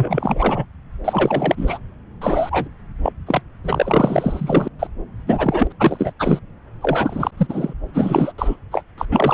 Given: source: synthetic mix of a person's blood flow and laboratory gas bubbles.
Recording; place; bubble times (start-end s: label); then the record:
Doppler ultrasound of blood flow; subclavian vein
0.00-0.65 s: bubbles
1.04-1.78 s: bubbles
2.21-2.68 s: bubbles
3.03-3.12 s: bubbles
3.26-3.42 s: bubbles
3.64-4.68 s: bubbles
4.79-4.87 s: bubbles
5.27-5.67 s: bubbles
5.70-5.73 s: bubbles
5.79-6.12 s: bubbles
6.19-6.40 s: bubbles
6.81-7.31 s: bubbles
7.37-7.73 s: bubbles
7.94-8.32 s: bubbles
8.38-8.56 s: bubbles
8.71-8.83 s: bubbles
8.97-9.05 s: bubbles
9.10-9.34 s: bubbles
From the record:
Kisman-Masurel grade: 343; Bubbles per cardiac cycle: rolling drumbeat, 9 or more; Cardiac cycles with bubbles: 100%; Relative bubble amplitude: loud (0.450 to 0.775); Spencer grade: 3 (all of the cardiac periods contain showers or single bubble signals, but not dominating or overriding the cardiac motion signals); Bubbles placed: anywhere in the cardiac cycle